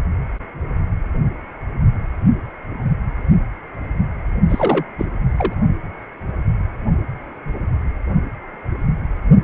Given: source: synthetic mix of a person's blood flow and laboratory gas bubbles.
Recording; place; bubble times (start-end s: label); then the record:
Doppler ultrasound of blood flow; precordium
4.50-4.85 s: bubbles
4.98-5.05 s: bubbles
5.37-5.54 s: bubbles
From the record:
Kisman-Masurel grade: 222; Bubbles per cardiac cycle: several, 3 to 8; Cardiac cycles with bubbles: 10 to 50%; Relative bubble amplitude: moderate (0.250 to 0.450); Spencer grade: 2 (many but less than half of the cardiac periods contain bubble signals, singularly or in groups); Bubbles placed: only in the low amplitude regions of the cardiac cycle